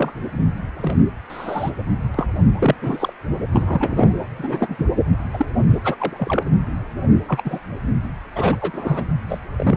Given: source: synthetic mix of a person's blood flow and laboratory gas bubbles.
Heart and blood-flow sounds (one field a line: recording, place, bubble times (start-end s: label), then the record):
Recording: Doppler ultrasound of blood flow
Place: precordium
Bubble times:
0.00-0.11 s: bubbles
0.82-0.96 s: bubbles
1.29-1.71 s: bubbles
2.14-2.26 s: bubbles
2.58-2.75 s: bubbles
2.81-3.13 s: bubbles
3.52-4.14 s: bubbles
4.38-4.75 s: bubbles
4.79-4.86 s: bubbles
5.33-5.46 s: bubbles
5.70-5.79 s: bubbles
5.84-5.96 s: bubbles
5.99-6.43 s: bubbles
7.28-7.42 s: bubbles
7.45-7.58 s: bubbles
8.35-8.56 s: bubbles
8.61-9.05 s: bubbles
9.29-9.38 s: bubbles
9.56-9.77 s: bubbles
From the record:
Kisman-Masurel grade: 232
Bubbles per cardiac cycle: several, 3 to 8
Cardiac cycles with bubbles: 50 to 99%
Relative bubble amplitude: moderate (0.250 to 0.450)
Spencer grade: 3 (all of the cardiac periods contain showers or single bubble signals, but not dominating or overriding the cardiac motion signals)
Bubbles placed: anywhere in the cardiac cycle